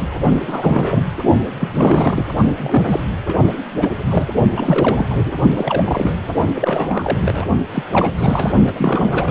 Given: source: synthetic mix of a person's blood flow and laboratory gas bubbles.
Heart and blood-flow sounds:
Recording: Doppler ultrasound of blood flow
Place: precordium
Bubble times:
0.00-0.09 s: bubbles
0.38-1.02 s: bubbles
1.59-1.69 s: bubbles
1.74-2.25 s: bubbles
2.57-2.84 s: bubbles
2.87-3.04 s: bubbles
3.26-3.44 s: bubbles
3.77-3.90 s: bubbles
4.11-4.28 s: bubbles
4.56-5.07 s: bubbles
5.10-5.32 s: bubbles
5.56-6.14 s: bubbles
6.55-7.20 s: bubbles
7.25-7.45 s: bubbles
7.74-7.83 s: bubbles
7.93-8.11 s: bubbles
8.18-8.53 s: bubbles
8.67-8.72 s: bubbles
8.75-9.31 s: bubbles
From the record:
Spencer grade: 3 (all of the cardiac periods contain showers or single bubble signals, but not dominating or overriding the cardiac motion signals)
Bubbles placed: only in the low amplitude regions of the cardiac cycle

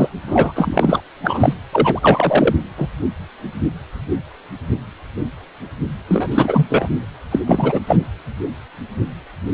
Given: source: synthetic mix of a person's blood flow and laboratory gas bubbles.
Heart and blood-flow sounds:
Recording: Doppler ultrasound of blood flow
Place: precordium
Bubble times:
0.00-0.08 s: bubbles
0.26-0.52 s: bubbles
0.55-1.02 s: bubbles
1.22-1.54 s: bubbles
1.72-2.56 s: bubbles
2.77-2.88 s: bubbles
6.08-6.26 s: bubbles
6.31-6.88 s: bubbles
7.31-7.39 s: bubbles
7.46-7.79 s: bubbles
7.86-7.99 s: bubbles
From the record:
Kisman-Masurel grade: 333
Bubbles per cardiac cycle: rolling drumbeat, 9 or more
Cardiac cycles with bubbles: 50 to 99%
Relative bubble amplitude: loud (0.450 to 0.775)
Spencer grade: 3 (all of the cardiac periods contain showers or single bubble signals, but not dominating or overriding the cardiac motion signals)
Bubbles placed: anywhere in the cardiac cycle

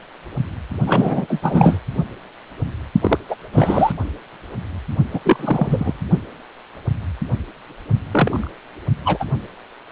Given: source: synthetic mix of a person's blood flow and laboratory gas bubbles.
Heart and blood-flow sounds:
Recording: Doppler ultrasound of blood flow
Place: precordium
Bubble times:
0.86-1.40 s: bubbles
1.42-1.78 s: bubbles
3.02-3.17 s: bubbles
3.29-3.35 s: bubbles
3.52-3.92 s: bubbles
5.14-5.20 s: bubbles
5.24-6.01 s: bubbles
8.11-8.51 s: bubbles
9.04-9.26 s: bubbles
From the record:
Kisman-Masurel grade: 223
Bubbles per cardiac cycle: several, 3 to 8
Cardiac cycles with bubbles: 10 to 50%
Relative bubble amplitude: loud (0.450 to 0.775)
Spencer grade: 2 (many but less than half of the cardiac periods contain bubble signals, singularly or in groups)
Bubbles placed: only in the low amplitude regions of the cardiac cycle

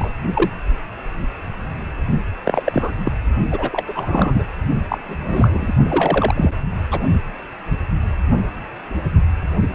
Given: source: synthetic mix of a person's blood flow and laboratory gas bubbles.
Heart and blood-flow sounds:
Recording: Doppler ultrasound of blood flow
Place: precordium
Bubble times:
0.00-0.11 s: bubbles
0.34-0.49 s: bubbles
2.44-2.63 s: bubbles
2.66-2.93 s: bubbles
3.04-3.12 s: bubbles
3.51-3.84 s: bubbles
3.88-4.43 s: bubbles
4.89-4.98 s: bubbles
5.05-5.73 s: bubbles
5.88-6.51 s: bubbles
6.91-7.00 s: bubbles
From the record:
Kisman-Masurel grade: 233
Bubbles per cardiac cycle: several, 3 to 8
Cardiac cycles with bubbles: 50 to 99%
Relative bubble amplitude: loud (0.450 to 0.775)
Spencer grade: 3 (all of the cardiac periods contain showers or single bubble signals, but not dominating or overriding the cardiac motion signals)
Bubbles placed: only in the low amplitude regions of the cardiac cycle

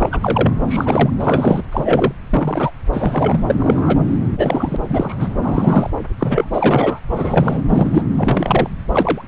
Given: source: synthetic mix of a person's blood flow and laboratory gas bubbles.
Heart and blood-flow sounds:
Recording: Doppler ultrasound of blood flow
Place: subclavian vein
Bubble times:
0.00-0.53 s: bubbles
0.68-1.10 s: bubbles
1.19-1.62 s: bubbles
1.72-2.12 s: bubbles
2.31-2.71 s: bubbles
2.92-3.55 s: bubbles
3.59-4.00 s: bubbles
4.37-4.76 s: bubbles
4.89-5.16 s: bubbles
5.20-5.29 s: bubbles
5.42-5.90 s: bubbles
6.19-6.50 s: bubbles
6.52-6.99 s: bubbles
7.10-7.62 s: bubbles
7.69-8.04 s: bubbles
8.18-8.70 s: bubbles
8.92-9.22 s: bubbles
From the record:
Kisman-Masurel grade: 233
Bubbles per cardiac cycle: several, 3 to 8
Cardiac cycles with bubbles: 50 to 99%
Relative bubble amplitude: loud (0.450 to 0.775)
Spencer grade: 3 (all of the cardiac periods contain showers or single bubble signals, but not dominating or overriding the cardiac motion signals)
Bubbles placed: anywhere in the cardiac cycle

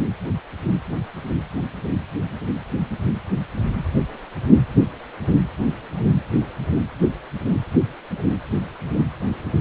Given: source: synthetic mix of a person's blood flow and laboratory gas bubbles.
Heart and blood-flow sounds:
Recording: Doppler ultrasound of blood flow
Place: precordium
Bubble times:
no bubbles
From the record:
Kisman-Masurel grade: 000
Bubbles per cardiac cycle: 0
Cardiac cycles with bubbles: 0%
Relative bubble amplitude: no bubbles discernible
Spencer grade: 0 (complete lack of bubble signals)

